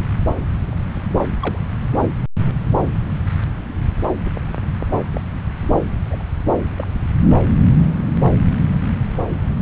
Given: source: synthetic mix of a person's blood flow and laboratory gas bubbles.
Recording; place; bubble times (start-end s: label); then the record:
Doppler ultrasound of blood flow; subclavian vein
1.07-1.18 s: bubbles
1.40-1.58 s: bubbles
1.92-2.07 s: bubbles
4.25-4.31 s: bubbles
5.14-5.21 s: bubbles
5.62-5.74 s: bubbles
6.04-6.23 s: bubbles
6.78-6.87 s: bubbles
From the record:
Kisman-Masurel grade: 121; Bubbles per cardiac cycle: 1 to 2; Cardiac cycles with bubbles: 10 to 50%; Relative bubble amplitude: barely perceptible (0.100 to 0.250); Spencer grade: 2 (many but less than half of the cardiac periods contain bubble signals, singularly or in groups); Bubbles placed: anywhere in the cardiac cycle